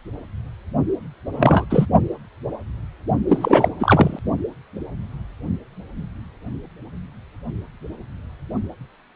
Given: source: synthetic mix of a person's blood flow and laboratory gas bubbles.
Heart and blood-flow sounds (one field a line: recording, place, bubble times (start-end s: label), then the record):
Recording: Doppler ultrasound of blood flow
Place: precordium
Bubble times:
1.33-1.65 s: bubbles
1.70-1.85 s: bubbles
3.28-3.68 s: bubbles
3.79-4.19 s: bubbles
From the record:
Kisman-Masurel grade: 223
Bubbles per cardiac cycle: several, 3 to 8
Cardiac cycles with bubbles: 10 to 50%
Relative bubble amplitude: loud (0.450 to 0.775)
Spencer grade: 2 (many but less than half of the cardiac periods contain bubble signals, singularly or in groups)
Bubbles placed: only in the low amplitude regions of the cardiac cycle